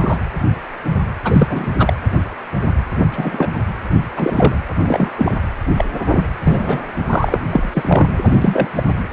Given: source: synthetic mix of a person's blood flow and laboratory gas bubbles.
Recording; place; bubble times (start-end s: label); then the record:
Doppler ultrasound of blood flow; precordium
0.00-0.18 s: bubbles
1.24-1.67 s: bubbles
1.78-1.94 s: bubbles
3.10-3.49 s: bubbles
4.17-4.56 s: bubbles
4.83-5.10 s: bubbles
5.17-5.35 s: bubbles
5.77-5.85 s: bubbles
6.11-6.27 s: bubbles
6.43-6.84 s: bubbles
7.10-7.40 s: bubbles
7.50-7.69 s: bubbles
7.73-8.08 s: bubbles
8.24-8.37 s: bubbles
8.41-8.68 s: bubbles
8.76-8.83 s: bubbles
From the record:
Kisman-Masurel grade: 233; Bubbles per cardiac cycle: several, 3 to 8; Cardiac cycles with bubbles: 50 to 99%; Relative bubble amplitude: loud (0.450 to 0.775); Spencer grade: 3 (all of the cardiac periods contain showers or single bubble signals, but not dominating or overriding the cardiac motion signals); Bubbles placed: anywhere in the cardiac cycle